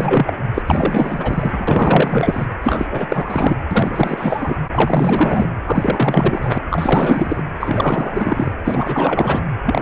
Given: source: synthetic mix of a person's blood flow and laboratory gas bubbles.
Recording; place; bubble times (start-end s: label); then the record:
Doppler ultrasound of blood flow; precordium
0.00-0.33 s: bubbles
0.54-0.62 s: bubbles
0.66-2.46 s: bubbles
2.63-3.55 s: bubbles
3.71-4.62 s: bubbles
4.71-5.49 s: bubbles
5.66-6.58 s: bubbles
6.68-7.43 s: bubbles
7.60-8.51 s: bubbles
8.64-9.43 s: bubbles
9.66-9.82 s: bubbles
From the record:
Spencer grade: 4 (maximum detectable bubble signal sounding continuously throughout systole and diastole of every cardiac period, and overriding the amplitude of the normal cardiac signals); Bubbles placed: anywhere in the cardiac cycle